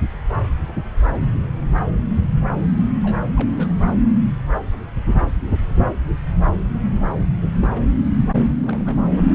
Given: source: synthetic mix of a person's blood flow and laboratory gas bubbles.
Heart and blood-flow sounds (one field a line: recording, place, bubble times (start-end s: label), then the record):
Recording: Doppler ultrasound of blood flow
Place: subclavian vein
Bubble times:
3.02-3.17 s: bubbles
3.36-3.73 s: bubbles
7.62-7.69 s: bubbles
7.75-7.81 s: bubbles
8.62-9.00 s: bubbles
9.29-9.34 s: bubbles
From the record:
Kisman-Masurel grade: 121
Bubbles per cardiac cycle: 1 to 2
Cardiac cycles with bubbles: 10 to 50%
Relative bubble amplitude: barely perceptible (0.100 to 0.250)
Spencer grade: 2 (many but less than half of the cardiac periods contain bubble signals, singularly or in groups)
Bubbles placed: anywhere in the cardiac cycle